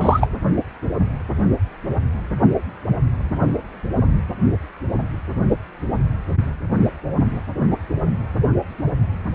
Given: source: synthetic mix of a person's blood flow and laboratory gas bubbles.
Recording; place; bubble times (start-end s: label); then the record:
Doppler ultrasound of blood flow; precordium
0.01-0.30 s: bubbles
From the record:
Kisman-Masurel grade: 213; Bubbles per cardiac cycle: several, 3 to 8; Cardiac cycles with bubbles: 1 to 10%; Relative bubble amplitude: loud (0.450 to 0.775); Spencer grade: 1 (occasional bubble signal discernible with the cardiac motion signal, with majority of cardiac periods free of bubbles); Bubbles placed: only in the low amplitude regions of the cardiac cycle